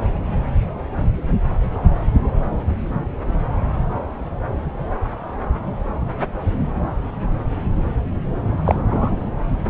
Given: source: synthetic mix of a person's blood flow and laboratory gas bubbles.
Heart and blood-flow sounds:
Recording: Doppler ultrasound of blood flow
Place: subclavian vein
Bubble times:
8.64-8.75 s: bubbles
8.91-9.14 s: bubbles
From the record:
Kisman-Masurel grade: 113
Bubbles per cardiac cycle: 1 to 2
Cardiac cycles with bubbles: 1 to 10%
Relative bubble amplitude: loud (0.450 to 0.775)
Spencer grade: 1 (occasional bubble signal discernible with the cardiac motion signal, with majority of cardiac periods free of bubbles)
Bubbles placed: anywhere in the cardiac cycle

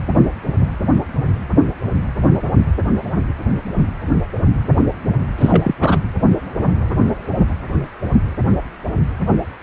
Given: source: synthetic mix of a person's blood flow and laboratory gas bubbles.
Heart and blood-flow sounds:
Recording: Doppler ultrasound of blood flow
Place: precordium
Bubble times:
5.38-5.75 s: bubbles
5.79-6.00 s: bubbles
From the record:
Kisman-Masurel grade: 213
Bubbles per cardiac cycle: several, 3 to 8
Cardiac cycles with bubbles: 1 to 10%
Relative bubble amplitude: loud (0.450 to 0.775)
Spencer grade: 1 (occasional bubble signal discernible with the cardiac motion signal, with majority of cardiac periods free of bubbles)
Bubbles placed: anywhere in the cardiac cycle

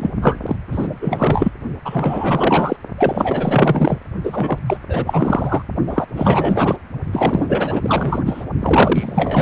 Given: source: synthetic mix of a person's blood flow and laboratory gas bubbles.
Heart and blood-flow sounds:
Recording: Doppler ultrasound of blood flow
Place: precordium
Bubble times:
0.00-0.09 s: bubbles
0.22-0.56 s: bubbles
0.67-1.51 s: bubbles
1.84-2.76 s: bubbles
2.97-3.98 s: bubbles
4.23-4.58 s: bubbles
4.66-4.79 s: bubbles
4.89-5.62 s: bubbles
5.87-6.06 s: bubbles
6.13-6.76 s: bubbles
7.12-8.21 s: bubbles
8.26-8.44 s: bubbles
8.60-9.42 s: bubbles
From the record:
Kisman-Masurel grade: 444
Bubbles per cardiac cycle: continuous sound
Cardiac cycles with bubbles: 100%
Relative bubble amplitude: maximal (0.775 to 0.999)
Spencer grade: 4 (maximum detectable bubble signal sounding continuously throughout systole and diastole of every cardiac period, and overriding the amplitude of the normal cardiac signals)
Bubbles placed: only in the low amplitude regions of the cardiac cycle

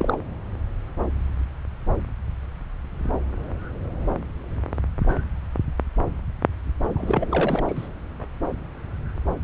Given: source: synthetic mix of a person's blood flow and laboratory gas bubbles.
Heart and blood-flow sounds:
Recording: Doppler ultrasound of blood flow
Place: subclavian vein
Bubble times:
0.00-0.17 s: bubbles
6.95-7.64 s: bubbles
7.68-7.88 s: bubbles
From the record:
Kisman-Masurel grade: 222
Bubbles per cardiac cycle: several, 3 to 8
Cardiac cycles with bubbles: 10 to 50%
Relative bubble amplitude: moderate (0.250 to 0.450)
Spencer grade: 2 (many but less than half of the cardiac periods contain bubble signals, singularly or in groups)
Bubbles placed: anywhere in the cardiac cycle

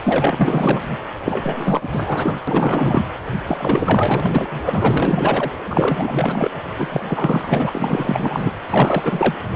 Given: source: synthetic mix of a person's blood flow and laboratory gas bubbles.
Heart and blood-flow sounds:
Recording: Doppler ultrasound of blood flow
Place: precordium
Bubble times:
0.03-0.80 s: bubbles
1.23-1.89 s: bubbles
1.92-2.36 s: bubbles
2.47-3.02 s: bubbles
3.46-5.52 s: bubbles
5.65-6.50 s: bubbles
6.78-7.01 s: bubbles
7.04-8.50 s: bubbles
8.58-9.34 s: bubbles
From the record:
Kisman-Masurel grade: 444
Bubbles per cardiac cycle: continuous sound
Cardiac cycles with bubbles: 100%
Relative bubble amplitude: maximal (0.775 to 0.999)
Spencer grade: 4 (maximum detectable bubble signal sounding continuously throughout systole and diastole of every cardiac period, and overriding the amplitude of the normal cardiac signals)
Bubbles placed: anywhere in the cardiac cycle

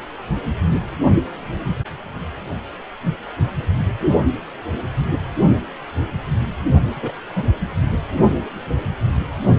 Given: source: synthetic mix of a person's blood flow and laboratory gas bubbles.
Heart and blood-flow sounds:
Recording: Doppler ultrasound of blood flow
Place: precordium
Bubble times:
6.96-7.12 s: bubbles
7.35-7.45 s: bubbles
From the record:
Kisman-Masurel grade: 112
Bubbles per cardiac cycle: 1 to 2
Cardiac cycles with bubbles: 1 to 10%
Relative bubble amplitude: moderate (0.250 to 0.450)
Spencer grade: 1 (occasional bubble signal discernible with the cardiac motion signal, with majority of cardiac periods free of bubbles)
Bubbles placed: anywhere in the cardiac cycle

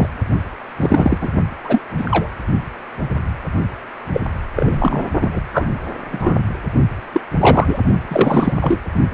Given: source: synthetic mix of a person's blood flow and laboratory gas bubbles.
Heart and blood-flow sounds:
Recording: Doppler ultrasound of blood flow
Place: precordium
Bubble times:
0.00-0.09 s: bubbles
0.77-1.18 s: bubbles
1.21-1.29 s: bubbles
1.64-1.81 s: bubbles
1.98-2.29 s: bubbles
4.12-4.21 s: bubbles
4.55-5.06 s: bubbles
5.21-5.42 s: bubbles
5.53-5.68 s: bubbles
6.12-6.40 s: bubbles
7.13-7.21 s: bubbles
7.41-7.80 s: bubbles
8.07-8.54 s: bubbles
8.60-8.80 s: bubbles
From the record:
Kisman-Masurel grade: 233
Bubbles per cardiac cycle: several, 3 to 8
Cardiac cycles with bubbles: 50 to 99%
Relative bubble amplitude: loud (0.450 to 0.775)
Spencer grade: 3 (all of the cardiac periods contain showers or single bubble signals, but not dominating or overriding the cardiac motion signals)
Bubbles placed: only in the low amplitude regions of the cardiac cycle

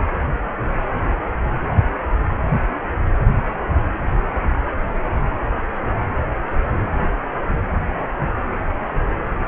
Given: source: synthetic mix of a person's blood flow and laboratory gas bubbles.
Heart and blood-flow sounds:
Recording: Doppler ultrasound of blood flow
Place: precordium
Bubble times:
no bubbles
From the record:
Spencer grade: 0 (complete lack of bubble signals)

